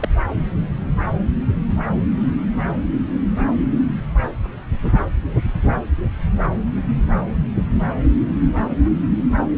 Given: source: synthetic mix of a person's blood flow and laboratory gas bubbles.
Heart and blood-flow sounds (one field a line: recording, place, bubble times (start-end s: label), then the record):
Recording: Doppler ultrasound of blood flow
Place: subclavian vein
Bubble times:
0.00-0.09 s: bubbles
From the record:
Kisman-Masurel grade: 112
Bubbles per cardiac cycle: 1 to 2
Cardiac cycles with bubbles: 1 to 10%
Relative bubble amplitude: moderate (0.250 to 0.450)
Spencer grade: 1 (occasional bubble signal discernible with the cardiac motion signal, with majority of cardiac periods free of bubbles)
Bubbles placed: anywhere in the cardiac cycle